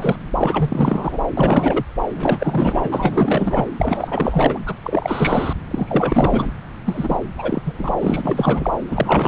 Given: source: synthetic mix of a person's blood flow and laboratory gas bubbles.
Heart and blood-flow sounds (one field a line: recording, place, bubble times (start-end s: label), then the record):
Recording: Doppler ultrasound of blood flow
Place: subclavian vein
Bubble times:
0.00-0.16 s: bubbles
0.39-1.20 s: bubbles
1.37-1.84 s: bubbles
2.15-3.67 s: bubbles
3.78-4.59 s: bubbles
4.66-4.75 s: bubbles
4.83-5.53 s: bubbles
5.71-6.51 s: bubbles
6.86-7.18 s: bubbles
7.37-7.62 s: bubbles
7.64-7.94 s: bubbles
7.99-8.71 s: bubbles
8.86-9.28 s: bubbles
From the record:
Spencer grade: 4 (maximum detectable bubble signal sounding continuously throughout systole and diastole of every cardiac period, and overriding the amplitude of the normal cardiac signals)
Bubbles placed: anywhere in the cardiac cycle